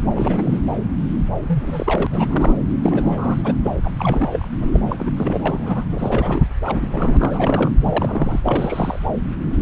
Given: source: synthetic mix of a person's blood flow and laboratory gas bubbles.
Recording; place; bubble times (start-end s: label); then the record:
Doppler ultrasound of blood flow; subclavian vein
0.15-0.58 s: bubbles
1.48-2.07 s: bubbles
2.10-2.55 s: bubbles
2.82-3.54 s: bubbles
3.64-3.71 s: bubbles
3.81-4.47 s: bubbles
4.61-4.81 s: bubbles
4.89-4.96 s: bubbles
4.98-5.11 s: bubbles
5.17-5.42 s: bubbles
5.46-5.83 s: bubbles
5.91-6.44 s: bubbles
6.62-7.72 s: bubbles
7.81-8.40 s: bubbles
8.44-8.99 s: bubbles
From the record:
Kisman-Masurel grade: 332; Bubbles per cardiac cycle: rolling drumbeat, 9 or more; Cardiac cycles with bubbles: 50 to 99%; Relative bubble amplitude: moderate (0.250 to 0.450); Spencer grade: 3 (all of the cardiac periods contain showers or single bubble signals, but not dominating or overriding the cardiac motion signals); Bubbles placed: anywhere in the cardiac cycle